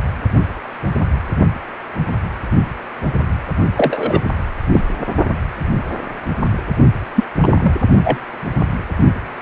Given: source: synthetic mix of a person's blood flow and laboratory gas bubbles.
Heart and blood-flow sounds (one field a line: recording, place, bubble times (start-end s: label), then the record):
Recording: Doppler ultrasound of blood flow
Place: precordium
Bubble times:
3.77-4.20 s: bubbles
4.72-4.83 s: bubbles
7.15-7.24 s: bubbles
7.40-7.73 s: bubbles
8.04-8.19 s: bubbles
From the record:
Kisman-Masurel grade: 123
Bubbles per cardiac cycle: 1 to 2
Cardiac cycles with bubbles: 10 to 50%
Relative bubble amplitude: loud (0.450 to 0.775)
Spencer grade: 2 (many but less than half of the cardiac periods contain bubble signals, singularly or in groups)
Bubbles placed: only in the low amplitude regions of the cardiac cycle